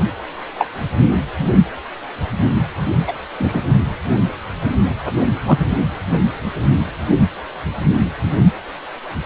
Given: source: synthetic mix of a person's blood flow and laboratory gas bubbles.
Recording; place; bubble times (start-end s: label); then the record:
Doppler ultrasound of blood flow; precordium
0.58-0.68 s: bubbles
3.07-3.12 s: bubbles
3.39-3.62 s: bubbles
5.46-5.58 s: bubbles
From the record:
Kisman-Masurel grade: 123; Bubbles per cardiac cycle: 1 to 2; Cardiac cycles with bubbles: 10 to 50%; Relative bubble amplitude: loud (0.450 to 0.775); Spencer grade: 2 (many but less than half of the cardiac periods contain bubble signals, singularly or in groups); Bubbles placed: only in the low amplitude regions of the cardiac cycle